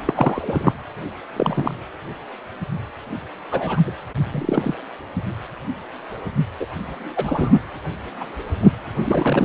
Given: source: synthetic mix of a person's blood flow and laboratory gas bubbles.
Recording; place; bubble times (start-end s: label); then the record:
Doppler ultrasound of blood flow; precordium
0.05-0.72 s: bubbles
1.36-1.74 s: bubbles
3.51-3.94 s: bubbles
4.30-4.74 s: bubbles
6.59-6.65 s: bubbles
7.15-7.59 s: bubbles
8.20-8.26 s: bubbles
8.60-8.71 s: bubbles
9.04-9.45 s: bubbles
From the record:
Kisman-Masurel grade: 232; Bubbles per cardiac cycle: several, 3 to 8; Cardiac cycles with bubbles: 50 to 99%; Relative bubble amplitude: moderate (0.250 to 0.450); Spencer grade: 3 (all of the cardiac periods contain showers or single bubble signals, but not dominating or overriding the cardiac motion signals); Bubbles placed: anywhere in the cardiac cycle